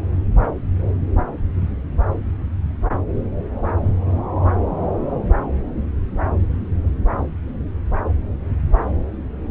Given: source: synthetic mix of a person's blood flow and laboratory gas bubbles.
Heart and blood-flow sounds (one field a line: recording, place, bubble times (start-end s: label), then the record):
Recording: Doppler ultrasound of blood flow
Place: subclavian vein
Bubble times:
no bubbles
From the record:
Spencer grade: 0 (complete lack of bubble signals)